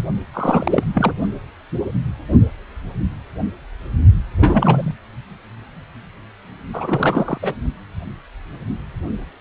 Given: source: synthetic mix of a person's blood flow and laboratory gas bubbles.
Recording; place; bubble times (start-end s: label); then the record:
Doppler ultrasound of blood flow; precordium
0.33-0.84 s: bubbles
0.94-1.14 s: bubbles
4.36-4.94 s: bubbles
6.73-7.38 s: bubbles
7.42-7.54 s: bubbles
From the record:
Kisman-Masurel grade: 232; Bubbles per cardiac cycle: several, 3 to 8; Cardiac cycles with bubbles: 50 to 99%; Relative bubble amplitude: moderate (0.250 to 0.450); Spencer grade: 3 (all of the cardiac periods contain showers or single bubble signals, but not dominating or overriding the cardiac motion signals); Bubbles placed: only in the low amplitude regions of the cardiac cycle